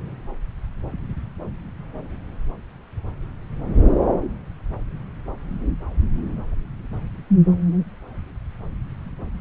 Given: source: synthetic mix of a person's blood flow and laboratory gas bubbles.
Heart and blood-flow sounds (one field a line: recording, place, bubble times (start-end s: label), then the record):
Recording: Doppler ultrasound of blood flow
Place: subclavian vein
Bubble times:
no bubbles
From the record:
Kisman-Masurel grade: 000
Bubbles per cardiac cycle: 0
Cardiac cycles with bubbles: 0%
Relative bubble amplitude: no bubbles discernible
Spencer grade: 0 (complete lack of bubble signals)